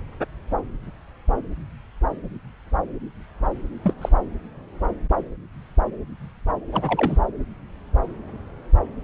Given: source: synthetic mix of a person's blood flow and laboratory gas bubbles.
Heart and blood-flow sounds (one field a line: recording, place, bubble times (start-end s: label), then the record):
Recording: Doppler ultrasound of blood flow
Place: subclavian vein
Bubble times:
3.84-3.95 s: bubbles
4.01-4.09 s: bubbles
6.71-7.18 s: bubbles
From the record:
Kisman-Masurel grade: 222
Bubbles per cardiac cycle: several, 3 to 8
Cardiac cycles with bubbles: 10 to 50%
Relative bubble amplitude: moderate (0.250 to 0.450)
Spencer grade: 2 (many but less than half of the cardiac periods contain bubble signals, singularly or in groups)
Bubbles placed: anywhere in the cardiac cycle